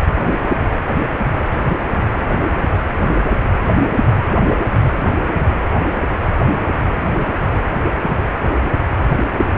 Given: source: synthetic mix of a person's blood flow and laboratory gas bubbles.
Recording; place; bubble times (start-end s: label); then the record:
Doppler ultrasound of blood flow; precordium
no bubbles
From the record:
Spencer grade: 0 (complete lack of bubble signals)